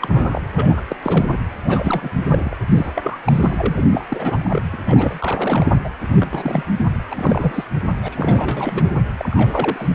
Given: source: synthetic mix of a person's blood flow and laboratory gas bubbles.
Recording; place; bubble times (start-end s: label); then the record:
Doppler ultrasound of blood flow; precordium
0.00-0.41 s: bubbles
0.55-0.83 s: bubbles
0.89-0.96 s: bubbles
1.02-1.26 s: bubbles
1.29-1.39 s: bubbles
1.64-2.56 s: bubbles
2.71-3.19 s: bubbles
3.25-3.84 s: bubbles
3.89-4.06 s: bubbles
4.08-4.62 s: bubbles
4.72-4.78 s: bubbles
4.86-5.67 s: bubbles
5.84-5.89 s: bubbles
6.16-6.64 s: bubbles
6.78-6.87 s: bubbles
7.10-7.64 s: bubbles
8.03-8.93 s: bubbles
9.19-9.95 s: bubbles
From the record:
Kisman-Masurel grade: 342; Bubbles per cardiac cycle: rolling drumbeat, 9 or more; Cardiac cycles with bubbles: 100%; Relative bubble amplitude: moderate (0.250 to 0.450); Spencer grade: 3 (all of the cardiac periods contain showers or single bubble signals, but not dominating or overriding the cardiac motion signals); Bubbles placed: anywhere in the cardiac cycle